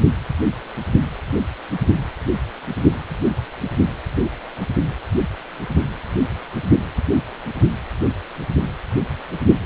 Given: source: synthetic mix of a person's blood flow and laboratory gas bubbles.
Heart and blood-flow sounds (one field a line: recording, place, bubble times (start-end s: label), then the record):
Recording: Doppler ultrasound of blood flow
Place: precordium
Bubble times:
0.00-0.02 s: bubbles
From the record:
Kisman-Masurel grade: 222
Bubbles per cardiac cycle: several, 3 to 8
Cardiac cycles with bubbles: 10 to 50%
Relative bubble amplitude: moderate (0.250 to 0.450)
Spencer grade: 2 (many but less than half of the cardiac periods contain bubble signals, singularly or in groups)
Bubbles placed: anywhere in the cardiac cycle